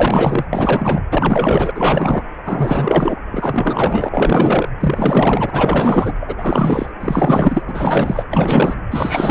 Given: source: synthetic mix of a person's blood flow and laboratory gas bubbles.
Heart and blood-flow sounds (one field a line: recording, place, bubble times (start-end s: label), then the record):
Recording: Doppler ultrasound of blood flow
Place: precordium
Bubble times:
0.00-0.45 s: bubbles
0.53-1.02 s: bubbles
1.10-1.71 s: bubbles
1.75-2.23 s: bubbles
2.44-3.19 s: bubbles
3.31-4.72 s: bubbles
4.80-6.13 s: bubbles
6.21-6.35 s: bubbles
6.38-6.91 s: bubbles
7.00-7.62 s: bubbles
7.67-8.24 s: bubbles
8.30-8.76 s: bubbles
8.90-9.31 s: bubbles
From the record:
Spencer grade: 4 (maximum detectable bubble signal sounding continuously throughout systole and diastole of every cardiac period, and overriding the amplitude of the normal cardiac signals)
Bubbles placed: anywhere in the cardiac cycle